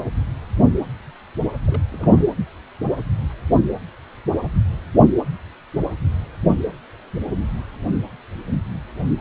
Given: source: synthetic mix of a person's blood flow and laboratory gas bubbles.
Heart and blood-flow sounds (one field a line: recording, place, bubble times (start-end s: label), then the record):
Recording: Doppler ultrasound of blood flow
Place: precordium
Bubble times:
1.66-1.82 s: bubbles
1.90-2.25 s: bubbles
From the record:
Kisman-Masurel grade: 211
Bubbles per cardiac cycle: several, 3 to 8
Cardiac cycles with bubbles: 1 to 10%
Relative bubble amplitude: barely perceptible (0.100 to 0.250)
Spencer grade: 1 (occasional bubble signal discernible with the cardiac motion signal, with majority of cardiac periods free of bubbles)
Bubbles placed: anywhere in the cardiac cycle